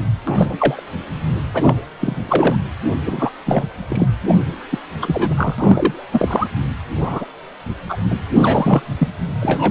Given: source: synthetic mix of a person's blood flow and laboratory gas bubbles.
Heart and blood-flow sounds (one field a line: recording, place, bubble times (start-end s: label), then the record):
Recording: Doppler ultrasound of blood flow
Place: precordium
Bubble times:
0.27-0.83 s: bubbles
1.54-1.75 s: bubbles
2.00-2.56 s: bubbles
3.06-3.30 s: bubbles
3.46-3.65 s: bubbles
3.89-4.06 s: bubbles
4.28-4.35 s: bubbles
4.71-4.79 s: bubbles
5.01-5.55 s: bubbles
5.58-6.06 s: bubbles
6.12-6.47 s: bubbles
7.00-7.25 s: bubbles
7.89-7.97 s: bubbles
8.10-8.17 s: bubbles
8.37-8.82 s: bubbles
8.98-9.08 s: bubbles
9.41-9.71 s: bubbles
From the record:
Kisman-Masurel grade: 243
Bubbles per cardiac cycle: several, 3 to 8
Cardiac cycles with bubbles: 100%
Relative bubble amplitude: loud (0.450 to 0.775)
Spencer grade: 3 (all of the cardiac periods contain showers or single bubble signals, but not dominating or overriding the cardiac motion signals)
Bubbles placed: anywhere in the cardiac cycle